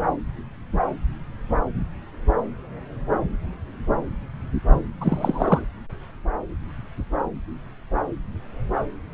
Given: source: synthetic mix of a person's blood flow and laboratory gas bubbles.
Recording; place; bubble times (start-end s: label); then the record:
Doppler ultrasound of blood flow; subclavian vein
5.00-5.67 s: bubbles
From the record:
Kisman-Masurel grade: 212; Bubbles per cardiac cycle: several, 3 to 8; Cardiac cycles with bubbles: 1 to 10%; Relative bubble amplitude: moderate (0.250 to 0.450); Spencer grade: 1 (occasional bubble signal discernible with the cardiac motion signal, with majority of cardiac periods free of bubbles); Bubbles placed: anywhere in the cardiac cycle